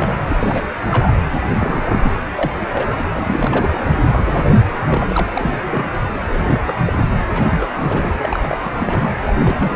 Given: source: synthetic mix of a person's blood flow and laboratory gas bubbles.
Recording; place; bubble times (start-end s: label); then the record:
Doppler ultrasound of blood flow; precordium
0.00-0.14 s: bubbles
0.28-0.36 s: bubbles
0.39-0.74 s: bubbles
0.80-1.21 s: bubbles
1.58-2.12 s: bubbles
2.35-2.52 s: bubbles
2.72-2.88 s: bubbles
3.02-3.78 s: bubbles
3.87-4.69 s: bubbles
4.87-5.28 s: bubbles
5.34-5.58 s: bubbles
5.70-5.85 s: bubbles
6.30-6.59 s: bubbles
6.66-6.73 s: bubbles
6.85-6.93 s: bubbles
6.97-7.08 s: bubbles
7.35-8.58 s: bubbles
8.64-8.71 s: bubbles
8.76-9.10 s: bubbles
9.24-9.76 s: bubbles
From the record:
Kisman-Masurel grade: 342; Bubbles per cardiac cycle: rolling drumbeat, 9 or more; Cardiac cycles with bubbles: 100%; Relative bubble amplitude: moderate (0.250 to 0.450); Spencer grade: 3 (all of the cardiac periods contain showers or single bubble signals, but not dominating or overriding the cardiac motion signals); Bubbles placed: anywhere in the cardiac cycle